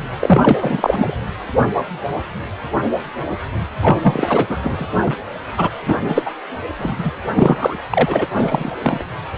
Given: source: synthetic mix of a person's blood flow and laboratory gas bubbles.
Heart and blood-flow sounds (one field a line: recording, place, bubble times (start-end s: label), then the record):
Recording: Doppler ultrasound of blood flow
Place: precordium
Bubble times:
0.20-1.17 s: bubbles
3.82-3.99 s: bubbles
4.01-4.58 s: bubbles
4.62-4.90 s: bubbles
5.03-5.17 s: bubbles
5.57-5.69 s: bubbles
5.85-5.94 s: bubbles
6.08-6.22 s: bubbles
6.25-6.30 s: bubbles
6.78-6.95 s: bubbles
6.98-7.11 s: bubbles
7.35-7.76 s: bubbles
7.89-8.26 s: bubbles
8.34-8.71 s: bubbles
8.83-9.04 s: bubbles
From the record:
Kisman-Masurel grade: 333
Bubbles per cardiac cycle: rolling drumbeat, 9 or more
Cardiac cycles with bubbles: 50 to 99%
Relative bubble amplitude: loud (0.450 to 0.775)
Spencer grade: 3 (all of the cardiac periods contain showers or single bubble signals, but not dominating or overriding the cardiac motion signals)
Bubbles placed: anywhere in the cardiac cycle